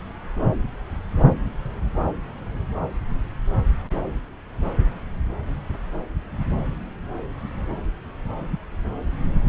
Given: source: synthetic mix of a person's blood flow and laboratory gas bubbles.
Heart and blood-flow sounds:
Doppler ultrasound of blood flow; subclavian vein
no bubbles
From the record:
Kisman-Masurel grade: 000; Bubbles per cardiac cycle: 0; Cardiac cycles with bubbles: 0%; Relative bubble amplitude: no bubbles discernible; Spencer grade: 0 (complete lack of bubble signals)

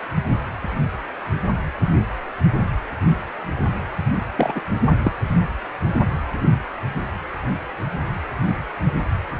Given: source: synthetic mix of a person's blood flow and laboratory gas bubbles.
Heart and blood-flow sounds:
Doppler ultrasound of blood flow; precordium
4.37-4.60 s: bubbles
4.90-4.96 s: bubbles
5.01-5.12 s: bubbles
From the record:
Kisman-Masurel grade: 222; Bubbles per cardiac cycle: several, 3 to 8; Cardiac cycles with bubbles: 10 to 50%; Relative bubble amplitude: moderate (0.250 to 0.450); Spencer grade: 2 (many but less than half of the cardiac periods contain bubble signals, singularly or in groups); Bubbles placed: anywhere in the cardiac cycle

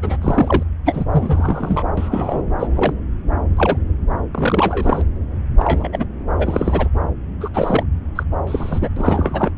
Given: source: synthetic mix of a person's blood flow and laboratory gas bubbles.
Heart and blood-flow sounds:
Doppler ultrasound of blood flow; subclavian vein
0.02-0.17 s: bubbles
0.22-0.63 s: bubbles
0.85-1.04 s: bubbles
1.12-1.84 s: bubbles
1.97-2.42 s: bubbles
2.59-2.67 s: bubbles
2.75-2.94 s: bubbles
3.56-3.77 s: bubbles
4.31-5.02 s: bubbles
5.58-5.89 s: bubbles
5.92-6.06 s: bubbles
6.38-6.88 s: bubbles
7.40-7.50 s: bubbles
7.54-7.83 s: bubbles
8.15-8.23 s: bubbles
8.47-8.88 s: bubbles
8.96-9.51 s: bubbles
From the record:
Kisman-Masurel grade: 343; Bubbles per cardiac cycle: rolling drumbeat, 9 or more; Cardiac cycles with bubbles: 100%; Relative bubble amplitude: loud (0.450 to 0.775); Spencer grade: 3 (all of the cardiac periods contain showers or single bubble signals, but not dominating or overriding the cardiac motion signals); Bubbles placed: anywhere in the cardiac cycle

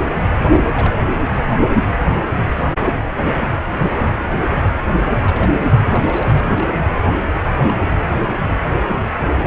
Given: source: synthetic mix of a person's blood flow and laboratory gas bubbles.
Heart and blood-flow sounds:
Doppler ultrasound of blood flow; precordium
0.46-0.66 s: bubbles
0.73-0.97 s: bubbles
5.12-5.60 s: bubbles
5.84-6.45 s: bubbles
6.50-6.85 s: bubbles
7.59-7.93 s: bubbles
From the record:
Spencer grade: 2 (many but less than half of the cardiac periods contain bubble signals, singularly or in groups); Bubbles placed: anywhere in the cardiac cycle

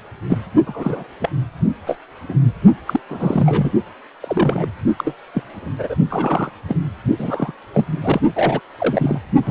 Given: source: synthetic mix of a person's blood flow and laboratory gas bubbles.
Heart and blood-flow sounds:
Doppler ultrasound of blood flow; precordium
0.30-0.38 s: bubbles
0.67-1.07 s: bubbles
1.19-1.29 s: bubbles
1.69-1.74 s: bubbles
1.86-1.98 s: bubbles
2.29-2.37 s: bubbles
2.87-3.00 s: bubbles
3.09-3.72 s: bubbles
4.21-4.69 s: bubbles
4.98-5.15 s: bubbles
5.34-5.43 s: bubbles
5.48-5.96 s: bubbles
6.10-6.50 s: bubbles
6.67-6.77 s: bubbles
7.19-7.52 s: bubbles
7.73-7.85 s: bubbles
8.02-8.21 s: bubbles
8.35-8.61 s: bubbles
8.78-9.21 s: bubbles
9.42-9.51 s: bubbles
From the record:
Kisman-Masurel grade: 242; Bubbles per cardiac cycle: several, 3 to 8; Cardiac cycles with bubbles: 100%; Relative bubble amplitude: moderate (0.250 to 0.450); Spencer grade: 3 (all of the cardiac periods contain showers or single bubble signals, but not dominating or overriding the cardiac motion signals); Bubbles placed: only in the low amplitude regions of the cardiac cycle

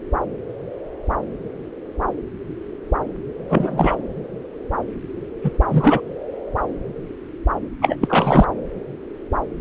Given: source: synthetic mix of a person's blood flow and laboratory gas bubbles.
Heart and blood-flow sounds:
Doppler ultrasound of blood flow; subclavian vein
3.49-3.95 s: bubbles
5.43-5.51 s: bubbles
5.69-6.00 s: bubbles
7.82-7.96 s: bubbles
8.01-8.48 s: bubbles
From the record:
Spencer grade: 2 (many but less than half of the cardiac periods contain bubble signals, singularly or in groups); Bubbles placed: anywhere in the cardiac cycle

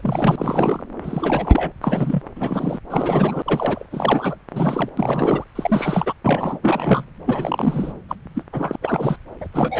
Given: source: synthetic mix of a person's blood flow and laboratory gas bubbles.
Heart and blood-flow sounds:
Doppler ultrasound of blood flow; subclavian vein
0.00-0.83 s: bubbles
1.04-1.72 s: bubbles
1.81-2.22 s: bubbles
2.36-2.80 s: bubbles
2.90-3.87 s: bubbles
3.91-4.36 s: bubbles
4.51-4.89 s: bubbles
4.97-5.44 s: bubbles
5.55-6.13 s: bubbles
6.25-6.59 s: bubbles
6.62-7.04 s: bubbles
7.26-7.92 s: bubbles
8.09-8.16 s: bubbles
8.35-8.43 s: bubbles
8.53-8.76 s: bubbles
8.82-9.17 s: bubbles
9.40-9.47 s: bubbles
9.54-9.80 s: bubbles
From the record:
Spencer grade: 3 (all of the cardiac periods contain showers or single bubble signals, but not dominating or overriding the cardiac motion signals); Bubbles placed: anywhere in the cardiac cycle

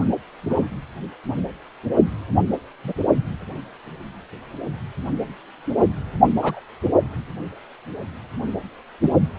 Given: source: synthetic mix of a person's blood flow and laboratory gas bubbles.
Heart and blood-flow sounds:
Doppler ultrasound of blood flow; precordium
0.00-0.05 s: bubbles
0.50-0.67 s: bubbles
2.84-2.93 s: bubbles
6.42-6.60 s: bubbles
9.02-9.11 s: bubbles
From the record:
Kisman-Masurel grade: 122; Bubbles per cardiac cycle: 1 to 2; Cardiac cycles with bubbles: 10 to 50%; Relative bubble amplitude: moderate (0.250 to 0.450); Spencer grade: 2 (many but less than half of the cardiac periods contain bubble signals, singularly or in groups); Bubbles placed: anywhere in the cardiac cycle

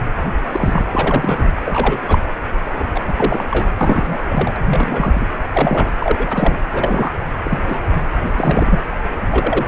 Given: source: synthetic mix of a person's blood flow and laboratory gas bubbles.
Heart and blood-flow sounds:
Doppler ultrasound of blood flow; precordium
0.00-0.02 s: bubbles
0.49-0.84 s: bubbles
0.92-1.52 s: bubbles
1.65-2.00 s: bubbles
2.07-2.20 s: bubbles
2.75-2.87 s: bubbles
2.94-3.02 s: bubbles
3.06-3.13 s: bubbles
3.17-3.46 s: bubbles
3.50-3.69 s: bubbles
3.81-4.18 s: bubbles
4.28-4.59 s: bubbles
4.66-5.29 s: bubbles
5.54-5.92 s: bubbles
6.00-6.58 s: bubbles
6.72-7.13 s: bubbles
7.45-7.58 s: bubbles
7.64-7.89 s: bubbles
8.22-8.80 s: bubbles
9.30-9.65 s: bubbles
From the record:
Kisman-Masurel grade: 243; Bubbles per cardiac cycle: several, 3 to 8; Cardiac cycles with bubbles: 100%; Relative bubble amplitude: loud (0.450 to 0.775); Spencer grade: 3 (all of the cardiac periods contain showers or single bubble signals, but not dominating or overriding the cardiac motion signals); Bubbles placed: anywhere in the cardiac cycle

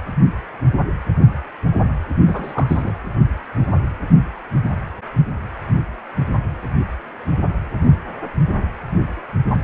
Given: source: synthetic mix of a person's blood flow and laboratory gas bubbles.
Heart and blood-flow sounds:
Doppler ultrasound of blood flow; precordium
2.25-2.92 s: bubbles
From the record:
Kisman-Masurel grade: 212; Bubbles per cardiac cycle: several, 3 to 8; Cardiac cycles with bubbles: 1 to 10%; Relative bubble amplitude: moderate (0.250 to 0.450); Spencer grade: 1 (occasional bubble signal discernible with the cardiac motion signal, with majority of cardiac periods free of bubbles); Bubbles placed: anywhere in the cardiac cycle

